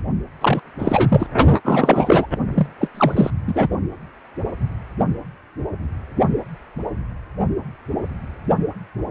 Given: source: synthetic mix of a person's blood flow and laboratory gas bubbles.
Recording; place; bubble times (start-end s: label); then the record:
Doppler ultrasound of blood flow; precordium
0.00-0.02 s: bubbles
0.40-0.60 s: bubbles
0.79-1.27 s: bubbles
1.64-2.26 s: bubbles
2.55-2.67 s: bubbles
2.80-2.90 s: bubbles
2.94-3.30 s: bubbles
3.47-3.68 s: bubbles
From the record:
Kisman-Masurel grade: 333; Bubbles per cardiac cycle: rolling drumbeat, 9 or more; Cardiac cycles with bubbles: 50 to 99%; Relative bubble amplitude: loud (0.450 to 0.775); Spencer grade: 3 (all of the cardiac periods contain showers or single bubble signals, but not dominating or overriding the cardiac motion signals); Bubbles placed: only in the low amplitude regions of the cardiac cycle